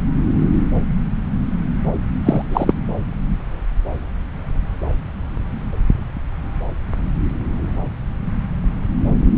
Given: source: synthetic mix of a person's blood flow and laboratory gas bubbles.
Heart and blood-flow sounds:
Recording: Doppler ultrasound of blood flow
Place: subclavian vein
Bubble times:
2.25-2.42 s: bubbles
2.50-2.74 s: bubbles
From the record:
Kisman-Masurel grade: 213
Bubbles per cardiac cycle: several, 3 to 8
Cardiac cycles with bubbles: 1 to 10%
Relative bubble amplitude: loud (0.450 to 0.775)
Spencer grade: 1 (occasional bubble signal discernible with the cardiac motion signal, with majority of cardiac periods free of bubbles)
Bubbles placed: anywhere in the cardiac cycle

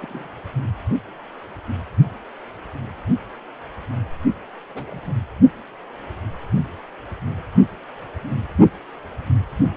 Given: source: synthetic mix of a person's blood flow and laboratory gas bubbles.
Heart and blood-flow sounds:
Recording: Doppler ultrasound of blood flow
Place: precordium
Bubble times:
0.01-0.28 s: bubbles
4.70-5.18 s: bubbles
From the record:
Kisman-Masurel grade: 221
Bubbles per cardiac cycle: several, 3 to 8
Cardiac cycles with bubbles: 10 to 50%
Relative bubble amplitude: barely perceptible (0.100 to 0.250)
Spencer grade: 2 (many but less than half of the cardiac periods contain bubble signals, singularly or in groups)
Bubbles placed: only in the low amplitude regions of the cardiac cycle

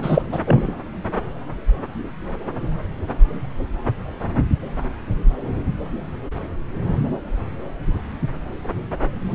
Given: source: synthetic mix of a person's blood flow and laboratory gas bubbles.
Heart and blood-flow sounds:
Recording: Doppler ultrasound of blood flow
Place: subclavian vein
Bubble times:
0.02-0.23 s: bubbles
0.32-0.39 s: bubbles
0.46-0.73 s: bubbles
From the record:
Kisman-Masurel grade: 213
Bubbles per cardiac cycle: several, 3 to 8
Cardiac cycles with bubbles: 1 to 10%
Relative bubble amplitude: loud (0.450 to 0.775)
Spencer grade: 1 (occasional bubble signal discernible with the cardiac motion signal, with majority of cardiac periods free of bubbles)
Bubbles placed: anywhere in the cardiac cycle

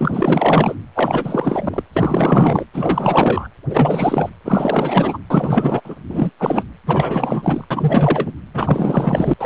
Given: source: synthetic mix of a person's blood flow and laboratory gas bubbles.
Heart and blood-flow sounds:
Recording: Doppler ultrasound of blood flow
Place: precordium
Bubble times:
0.00-0.75 s: bubbles
0.95-1.83 s: bubbles
1.93-2.65 s: bubbles
2.73-3.48 s: bubbles
3.69-4.29 s: bubbles
4.44-5.19 s: bubbles
5.30-5.81 s: bubbles
5.84-5.96 s: bubbles
6.08-6.31 s: bubbles
6.39-6.64 s: bubbles
6.86-7.64 s: bubbles
7.71-8.33 s: bubbles
8.54-9.33 s: bubbles
9.38-9.46 s: bubbles
From the record:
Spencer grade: 4 (maximum detectable bubble signal sounding continuously throughout systole and diastole of every cardiac period, and overriding the amplitude of the normal cardiac signals)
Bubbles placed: anywhere in the cardiac cycle

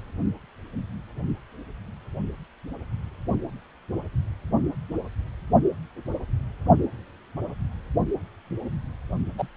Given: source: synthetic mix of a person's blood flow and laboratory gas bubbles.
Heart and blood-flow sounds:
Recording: Doppler ultrasound of blood flow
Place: precordium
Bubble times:
9.38-9.47 s: bubbles
From the record:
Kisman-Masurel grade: 213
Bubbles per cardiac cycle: several, 3 to 8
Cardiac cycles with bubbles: 1 to 10%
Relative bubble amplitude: loud (0.450 to 0.775)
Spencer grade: 1 (occasional bubble signal discernible with the cardiac motion signal, with majority of cardiac periods free of bubbles)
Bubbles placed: only in the low amplitude regions of the cardiac cycle

